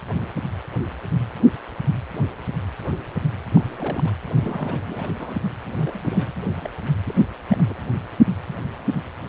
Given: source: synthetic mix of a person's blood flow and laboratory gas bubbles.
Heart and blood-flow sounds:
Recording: Doppler ultrasound of blood flow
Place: precordium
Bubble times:
3.54-4.13 s: bubbles
4.41-5.15 s: bubbles
5.18-5.42 s: bubbles
5.78-6.32 s: bubbles
6.55-6.71 s: bubbles
7.07-7.14 s: bubbles
7.51-7.74 s: bubbles
From the record:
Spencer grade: 2 (many but less than half of the cardiac periods contain bubble signals, singularly or in groups)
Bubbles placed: anywhere in the cardiac cycle

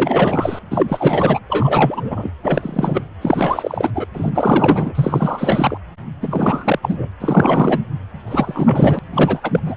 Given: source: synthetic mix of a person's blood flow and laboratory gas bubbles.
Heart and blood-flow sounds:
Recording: Doppler ultrasound of blood flow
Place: precordium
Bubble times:
0.00-0.59 s: bubbles
0.71-1.40 s: bubbles
1.49-2.31 s: bubbles
2.43-3.05 s: bubbles
3.21-3.90 s: bubbles
3.95-4.06 s: bubbles
4.14-5.77 s: bubbles
6.22-6.79 s: bubbles
6.82-7.07 s: bubbles
7.20-7.79 s: bubbles
8.27-8.99 s: bubbles
9.13-9.59 s: bubbles
9.65-9.75 s: bubbles
From the record:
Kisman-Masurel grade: 343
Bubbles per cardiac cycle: rolling drumbeat, 9 or more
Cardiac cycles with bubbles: 100%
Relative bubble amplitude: loud (0.450 to 0.775)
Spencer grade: 3 (all of the cardiac periods contain showers or single bubble signals, but not dominating or overriding the cardiac motion signals)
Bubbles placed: anywhere in the cardiac cycle

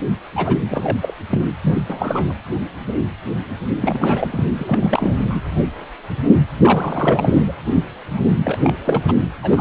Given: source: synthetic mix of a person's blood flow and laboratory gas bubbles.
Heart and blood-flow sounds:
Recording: Doppler ultrasound of blood flow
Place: precordium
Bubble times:
0.35-0.57 s: bubbles
0.70-0.98 s: bubbles
1.01-1.14 s: bubbles
1.29-1.42 s: bubbles
1.62-1.84 s: bubbles
1.90-2.35 s: bubbles
3.81-4.47 s: bubbles
4.58-5.40 s: bubbles
6.60-7.53 s: bubbles
8.43-8.58 s: bubbles
8.62-8.77 s: bubbles
8.84-9.13 s: bubbles
9.42-9.61 s: bubbles
From the record:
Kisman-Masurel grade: 332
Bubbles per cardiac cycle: rolling drumbeat, 9 or more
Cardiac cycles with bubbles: 50 to 99%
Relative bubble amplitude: moderate (0.250 to 0.450)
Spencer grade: 3 (all of the cardiac periods contain showers or single bubble signals, but not dominating or overriding the cardiac motion signals)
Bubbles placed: anywhere in the cardiac cycle

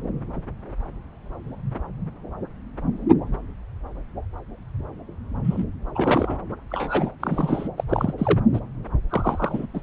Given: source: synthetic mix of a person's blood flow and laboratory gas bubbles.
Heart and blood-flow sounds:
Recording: Doppler ultrasound of blood flow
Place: subclavian vein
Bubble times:
5.44-5.64 s: bubbles
5.95-6.38 s: bubbles
6.70-7.15 s: bubbles
7.20-7.69 s: bubbles
7.77-7.84 s: bubbles
7.88-8.13 s: bubbles
8.18-8.39 s: bubbles
8.54-8.60 s: bubbles
9.10-9.66 s: bubbles
9.73-9.81 s: bubbles
From the record:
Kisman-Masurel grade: 232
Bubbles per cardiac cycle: several, 3 to 8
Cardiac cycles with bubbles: 50 to 99%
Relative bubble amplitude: moderate (0.250 to 0.450)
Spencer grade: 3 (all of the cardiac periods contain showers or single bubble signals, but not dominating or overriding the cardiac motion signals)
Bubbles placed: anywhere in the cardiac cycle

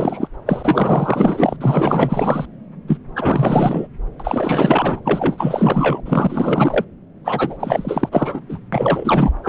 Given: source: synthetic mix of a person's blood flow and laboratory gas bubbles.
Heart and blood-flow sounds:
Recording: Doppler ultrasound of blood flow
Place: subclavian vein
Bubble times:
0.00-0.27 s: bubbles
0.46-1.56 s: bubbles
1.60-2.46 s: bubbles
2.88-2.98 s: bubbles
3.16-3.87 s: bubbles
4.20-5.00 s: bubbles
5.04-6.00 s: bubbles
6.05-6.84 s: bubbles
7.24-7.57 s: bubbles
7.59-8.09 s: bubbles
8.11-8.40 s: bubbles
8.48-8.58 s: bubbles
8.72-9.33 s: bubbles
9.43-9.49 s: bubbles
From the record:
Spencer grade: 4 (maximum detectable bubble signal sounding continuously throughout systole and diastole of every cardiac period, and overriding the amplitude of the normal cardiac signals)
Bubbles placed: anywhere in the cardiac cycle

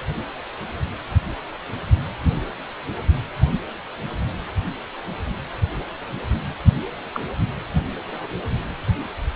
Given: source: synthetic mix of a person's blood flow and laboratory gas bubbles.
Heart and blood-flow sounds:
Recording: Doppler ultrasound of blood flow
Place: precordium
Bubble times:
7.13-7.20 s: bubbles
From the record:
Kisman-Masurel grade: 111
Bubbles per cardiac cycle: 1 to 2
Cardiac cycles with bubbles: 1 to 10%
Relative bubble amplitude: barely perceptible (0.100 to 0.250)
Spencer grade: 1 (occasional bubble signal discernible with the cardiac motion signal, with majority of cardiac periods free of bubbles)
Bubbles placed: anywhere in the cardiac cycle

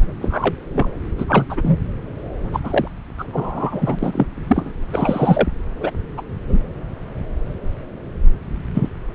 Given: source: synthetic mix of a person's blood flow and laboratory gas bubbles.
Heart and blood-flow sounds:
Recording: Doppler ultrasound of blood flow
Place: subclavian vein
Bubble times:
0.21-0.54 s: bubbles
0.74-0.86 s: bubbles
1.18-1.25 s: bubbles
1.28-1.45 s: bubbles
1.49-1.77 s: bubbles
2.53-2.60 s: bubbles
2.64-2.88 s: bubbles
3.18-3.24 s: bubbles
3.33-4.26 s: bubbles
4.47-4.72 s: bubbles
4.92-5.47 s: bubbles
5.80-5.90 s: bubbles
6.17-6.22 s: bubbles
6.47-6.62 s: bubbles
8.75-8.89 s: bubbles
From the record:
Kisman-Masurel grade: 233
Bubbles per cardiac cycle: several, 3 to 8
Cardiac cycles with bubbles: 50 to 99%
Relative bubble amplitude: loud (0.450 to 0.775)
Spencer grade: 3 (all of the cardiac periods contain showers or single bubble signals, but not dominating or overriding the cardiac motion signals)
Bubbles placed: anywhere in the cardiac cycle

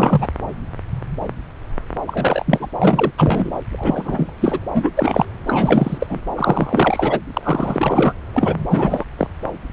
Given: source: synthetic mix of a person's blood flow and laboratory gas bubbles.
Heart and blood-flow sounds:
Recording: Doppler ultrasound of blood flow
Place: subclavian vein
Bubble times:
0.00-0.27 s: bubbles
2.06-2.68 s: bubbles
2.78-3.11 s: bubbles
3.17-3.51 s: bubbles
3.72-4.33 s: bubbles
4.41-4.60 s: bubbles
4.75-4.91 s: bubbles
4.97-5.26 s: bubbles
5.47-6.07 s: bubbles
6.09-6.21 s: bubbles
6.36-7.20 s: bubbles
7.33-8.14 s: bubbles
8.34-8.54 s: bubbles
8.70-9.04 s: bubbles
9.18-9.28 s: bubbles
From the record:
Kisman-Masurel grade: 333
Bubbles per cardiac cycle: rolling drumbeat, 9 or more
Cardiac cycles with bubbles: 50 to 99%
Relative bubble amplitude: loud (0.450 to 0.775)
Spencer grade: 3 (all of the cardiac periods contain showers or single bubble signals, but not dominating or overriding the cardiac motion signals)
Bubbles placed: anywhere in the cardiac cycle

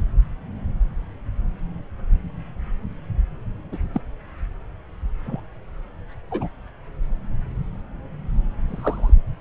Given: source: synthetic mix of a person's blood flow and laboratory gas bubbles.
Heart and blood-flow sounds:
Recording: Doppler ultrasound of blood flow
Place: subclavian vein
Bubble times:
3.72-3.78 s: bubbles
3.94-4.01 s: bubbles
5.25-5.40 s: bubbles
6.31-6.48 s: bubbles
8.68-9.13 s: bubbles
From the record:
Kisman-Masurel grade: 122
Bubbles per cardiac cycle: 1 to 2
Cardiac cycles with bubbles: 10 to 50%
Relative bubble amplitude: moderate (0.250 to 0.450)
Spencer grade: 2 (many but less than half of the cardiac periods contain bubble signals, singularly or in groups)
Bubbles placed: anywhere in the cardiac cycle

